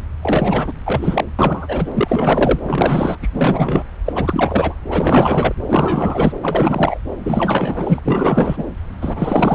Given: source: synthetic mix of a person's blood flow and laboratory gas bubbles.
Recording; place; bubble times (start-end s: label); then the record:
Doppler ultrasound of blood flow; subclavian vein
0.23-0.72 s: bubbles
0.85-1.24 s: bubbles
1.39-2.60 s: bubbles
2.65-3.18 s: bubbles
3.22-3.28 s: bubbles
3.33-3.84 s: bubbles
4.05-4.75 s: bubbles
4.88-5.55 s: bubbles
5.67-6.32 s: bubbles
6.42-7.00 s: bubbles
7.23-8.01 s: bubbles
8.04-8.65 s: bubbles
9.02-9.55 s: bubbles
From the record:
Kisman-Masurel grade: 444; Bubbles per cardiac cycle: continuous sound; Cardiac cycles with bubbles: 100%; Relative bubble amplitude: maximal (0.775 to 0.999); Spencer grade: 4 (maximum detectable bubble signal sounding continuously throughout systole and diastole of every cardiac period, and overriding the amplitude of the normal cardiac signals); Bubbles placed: anywhere in the cardiac cycle